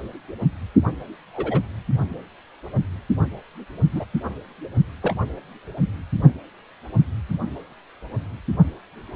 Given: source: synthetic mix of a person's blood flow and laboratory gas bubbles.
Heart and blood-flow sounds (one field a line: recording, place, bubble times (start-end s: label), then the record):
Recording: Doppler ultrasound of blood flow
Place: precordium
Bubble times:
1.33-1.62 s: bubbles
3.92-4.04 s: bubbles
5.02-5.14 s: bubbles
From the record:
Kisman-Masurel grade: 122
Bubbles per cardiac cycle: 1 to 2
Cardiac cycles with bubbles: 10 to 50%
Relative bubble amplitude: moderate (0.250 to 0.450)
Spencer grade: 2 (many but less than half of the cardiac periods contain bubble signals, singularly or in groups)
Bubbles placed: only in the low amplitude regions of the cardiac cycle